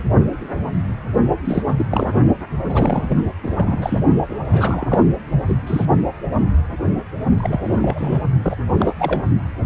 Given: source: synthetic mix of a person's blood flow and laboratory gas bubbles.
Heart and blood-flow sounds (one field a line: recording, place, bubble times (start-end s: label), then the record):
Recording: Doppler ultrasound of blood flow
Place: precordium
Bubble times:
1.45-1.64 s: bubbles
1.67-1.86 s: bubbles
1.90-2.14 s: bubbles
2.69-3.18 s: bubbles
3.42-3.99 s: bubbles
4.28-4.38 s: bubbles
4.51-5.05 s: bubbles
5.47-5.54 s: bubbles
5.66-5.86 s: bubbles
7.37-8.22 s: bubbles
8.42-8.57 s: bubbles
8.69-8.94 s: bubbles
8.99-9.22 s: bubbles
From the record:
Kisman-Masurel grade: 332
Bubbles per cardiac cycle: rolling drumbeat, 9 or more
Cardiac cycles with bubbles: 50 to 99%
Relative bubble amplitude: moderate (0.250 to 0.450)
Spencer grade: 3 (all of the cardiac periods contain showers or single bubble signals, but not dominating or overriding the cardiac motion signals)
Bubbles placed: only in the low amplitude regions of the cardiac cycle